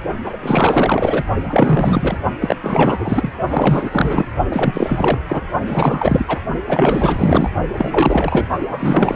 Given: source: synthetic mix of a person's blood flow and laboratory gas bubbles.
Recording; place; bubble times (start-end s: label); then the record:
Doppler ultrasound of blood flow; precordium
0.24-0.37 s: bubbles
0.42-1.23 s: bubbles
1.44-2.17 s: bubbles
2.41-2.56 s: bubbles
2.62-3.32 s: bubbles
3.50-4.26 s: bubbles
4.49-5.18 s: bubbles
5.29-5.42 s: bubbles
5.66-6.41 s: bubbles
6.67-7.50 s: bubbles
7.73-8.48 s: bubbles
8.70-9.15 s: bubbles
From the record:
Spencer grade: 4 (maximum detectable bubble signal sounding continuously throughout systole and diastole of every cardiac period, and overriding the amplitude of the normal cardiac signals); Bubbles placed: only in the low amplitude regions of the cardiac cycle